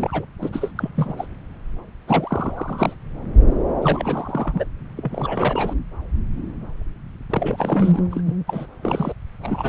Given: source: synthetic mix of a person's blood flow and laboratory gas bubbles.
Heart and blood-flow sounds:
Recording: Doppler ultrasound of blood flow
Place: subclavian vein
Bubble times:
0.00-0.25 s: bubbles
0.41-0.71 s: bubbles
0.76-0.91 s: bubbles
0.94-1.26 s: bubbles
2.07-2.95 s: bubbles
3.81-4.65 s: bubbles
4.96-5.74 s: bubbles
7.30-8.02 s: bubbles
8.11-8.21 s: bubbles
8.26-8.36 s: bubbles
8.47-8.67 s: bubbles
8.82-9.13 s: bubbles
9.43-9.69 s: bubbles
From the record:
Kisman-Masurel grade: 332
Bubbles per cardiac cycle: rolling drumbeat, 9 or more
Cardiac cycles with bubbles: 50 to 99%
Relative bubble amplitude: moderate (0.250 to 0.450)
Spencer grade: 3 (all of the cardiac periods contain showers or single bubble signals, but not dominating or overriding the cardiac motion signals)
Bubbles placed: anywhere in the cardiac cycle

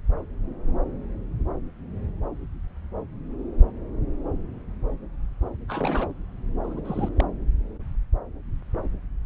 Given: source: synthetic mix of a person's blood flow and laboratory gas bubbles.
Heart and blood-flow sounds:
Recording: Doppler ultrasound of blood flow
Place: subclavian vein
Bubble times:
5.68-6.11 s: bubbles
6.63-6.81 s: bubbles
6.84-7.09 s: bubbles
7.17-7.24 s: bubbles
From the record:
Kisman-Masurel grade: 211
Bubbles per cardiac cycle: several, 3 to 8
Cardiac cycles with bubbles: 1 to 10%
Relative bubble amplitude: barely perceptible (0.100 to 0.250)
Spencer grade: 1 (occasional bubble signal discernible with the cardiac motion signal, with majority of cardiac periods free of bubbles)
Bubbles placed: anywhere in the cardiac cycle

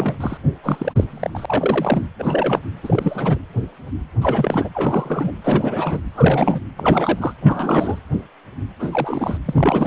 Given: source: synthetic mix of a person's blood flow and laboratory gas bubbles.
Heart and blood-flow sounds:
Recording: Doppler ultrasound of blood flow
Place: precordium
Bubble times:
0.00-0.17 s: bubbles
0.20-0.38 s: bubbles
0.63-0.92 s: bubbles
0.96-1.04 s: bubbles
1.09-2.07 s: bubbles
2.19-2.60 s: bubbles
2.83-3.39 s: bubbles
4.21-4.69 s: bubbles
4.75-5.32 s: bubbles
5.44-6.00 s: bubbles
6.12-6.61 s: bubbles
6.77-7.33 s: bubbles
7.41-7.99 s: bubbles
8.79-9.38 s: bubbles
9.46-9.87 s: bubbles
From the record:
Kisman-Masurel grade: 332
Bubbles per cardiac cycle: rolling drumbeat, 9 or more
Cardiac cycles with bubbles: 50 to 99%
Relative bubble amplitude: moderate (0.250 to 0.450)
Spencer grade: 3 (all of the cardiac periods contain showers or single bubble signals, but not dominating or overriding the cardiac motion signals)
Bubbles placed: anywhere in the cardiac cycle

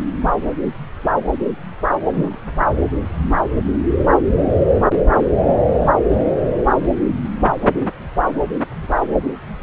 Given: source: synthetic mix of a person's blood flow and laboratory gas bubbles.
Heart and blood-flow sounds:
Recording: Doppler ultrasound of blood flow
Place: subclavian vein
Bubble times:
2.12-2.39 s: bubbles
From the record:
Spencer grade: 1 (occasional bubble signal discernible with the cardiac motion signal, with majority of cardiac periods free of bubbles)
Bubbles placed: anywhere in the cardiac cycle

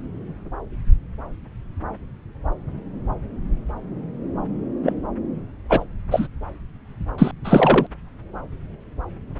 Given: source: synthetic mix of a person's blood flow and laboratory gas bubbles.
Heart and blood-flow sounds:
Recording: Doppler ultrasound of blood flow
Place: subclavian vein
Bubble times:
4.83-4.93 s: bubbles
5.69-5.83 s: bubbles
6.11-6.27 s: bubbles
7.18-7.31 s: bubbles
7.44-7.87 s: bubbles
From the record:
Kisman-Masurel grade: 223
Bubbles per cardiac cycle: several, 3 to 8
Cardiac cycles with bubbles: 10 to 50%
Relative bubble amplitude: loud (0.450 to 0.775)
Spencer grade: 2 (many but less than half of the cardiac periods contain bubble signals, singularly or in groups)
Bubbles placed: anywhere in the cardiac cycle

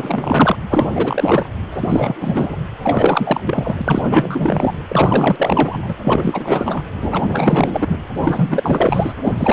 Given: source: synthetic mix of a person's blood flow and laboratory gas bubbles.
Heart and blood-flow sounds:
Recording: Doppler ultrasound of blood flow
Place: precordium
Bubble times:
0.00-0.56 s: bubbles
0.69-0.89 s: bubbles
0.95-1.49 s: bubbles
1.71-2.57 s: bubbles
2.83-3.41 s: bubbles
3.45-4.74 s: bubbles
4.88-5.92 s: bubbles
6.04-6.84 s: bubbles
7.00-7.97 s: bubbles
8.14-9.14 s: bubbles
9.21-9.32 s: bubbles
9.38-9.53 s: bubbles
From the record:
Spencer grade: 4 (maximum detectable bubble signal sounding continuously throughout systole and diastole of every cardiac period, and overriding the amplitude of the normal cardiac signals)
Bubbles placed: anywhere in the cardiac cycle

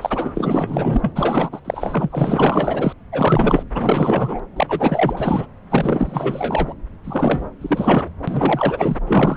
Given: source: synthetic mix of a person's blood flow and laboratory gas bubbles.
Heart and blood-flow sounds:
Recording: Doppler ultrasound of blood flow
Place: subclavian vein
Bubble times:
0.01-1.60 s: bubbles
1.65-2.94 s: bubbles
3.11-3.65 s: bubbles
3.74-4.39 s: bubbles
4.56-5.46 s: bubbles
5.70-6.74 s: bubbles
7.04-7.49 s: bubbles
7.61-8.10 s: bubbles
8.27-8.98 s: bubbles
9.06-9.37 s: bubbles
From the record:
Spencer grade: 4 (maximum detectable bubble signal sounding continuously throughout systole and diastole of every cardiac period, and overriding the amplitude of the normal cardiac signals)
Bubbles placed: anywhere in the cardiac cycle

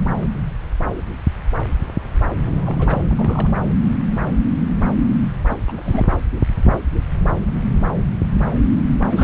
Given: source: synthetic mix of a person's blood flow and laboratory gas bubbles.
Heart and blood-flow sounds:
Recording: Doppler ultrasound of blood flow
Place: subclavian vein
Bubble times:
2.40-3.02 s: bubbles
3.09-3.61 s: bubbles
5.49-5.57 s: bubbles
5.68-6.11 s: bubbles
9.09-9.24 s: bubbles
From the record:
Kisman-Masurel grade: 221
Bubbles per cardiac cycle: several, 3 to 8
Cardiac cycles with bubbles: 10 to 50%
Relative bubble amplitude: barely perceptible (0.100 to 0.250)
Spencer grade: 2 (many but less than half of the cardiac periods contain bubble signals, singularly or in groups)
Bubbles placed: anywhere in the cardiac cycle

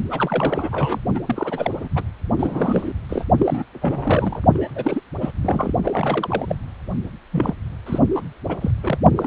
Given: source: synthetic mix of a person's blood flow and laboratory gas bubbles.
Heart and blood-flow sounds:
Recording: Doppler ultrasound of blood flow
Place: precordium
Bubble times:
0.10-0.99 s: bubbles
1.15-1.20 s: bubbles
1.26-1.88 s: bubbles
1.95-2.04 s: bubbles
2.36-2.93 s: bubbles
3.08-3.25 s: bubbles
3.38-3.63 s: bubbles
3.81-4.42 s: bubbles
4.54-4.70 s: bubbles
4.75-5.00 s: bubbles
5.21-5.31 s: bubbles
5.42-5.73 s: bubbles
5.83-6.55 s: bubbles
7.32-7.54 s: bubbles
7.86-7.99 s: bubbles
8.14-8.21 s: bubbles
8.48-8.57 s: bubbles
8.61-8.71 s: bubbles
8.83-8.98 s: bubbles
9.16-9.27 s: bubbles
From the record:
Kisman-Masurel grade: 332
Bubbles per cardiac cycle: rolling drumbeat, 9 or more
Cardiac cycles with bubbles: 50 to 99%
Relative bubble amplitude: moderate (0.250 to 0.450)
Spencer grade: 3 (all of the cardiac periods contain showers or single bubble signals, but not dominating or overriding the cardiac motion signals)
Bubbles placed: only in the low amplitude regions of the cardiac cycle

